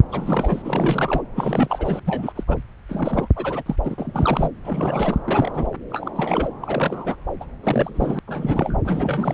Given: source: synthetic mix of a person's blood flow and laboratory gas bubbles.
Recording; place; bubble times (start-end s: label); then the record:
Doppler ultrasound of blood flow; subclavian vein
0.10-1.22 s: bubbles
1.35-2.00 s: bubbles
2.06-2.33 s: bubbles
2.36-2.43 s: bubbles
2.47-2.57 s: bubbles
2.89-3.28 s: bubbles
3.36-3.62 s: bubbles
3.66-3.76 s: bubbles
3.84-4.51 s: bubbles
4.64-5.18 s: bubbles
5.27-5.51 s: bubbles
5.54-5.67 s: bubbles
5.90-6.12 s: bubbles
6.15-6.48 s: bubbles
6.60-7.15 s: bubbles
7.40-7.46 s: bubbles
7.63-8.19 s: bubbles
8.28-8.78 s: bubbles
8.85-9.33 s: bubbles
From the record:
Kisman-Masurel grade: 342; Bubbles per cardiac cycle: rolling drumbeat, 9 or more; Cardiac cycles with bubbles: 100%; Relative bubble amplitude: moderate (0.250 to 0.450); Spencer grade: 3 (all of the cardiac periods contain showers or single bubble signals, but not dominating or overriding the cardiac motion signals); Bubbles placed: anywhere in the cardiac cycle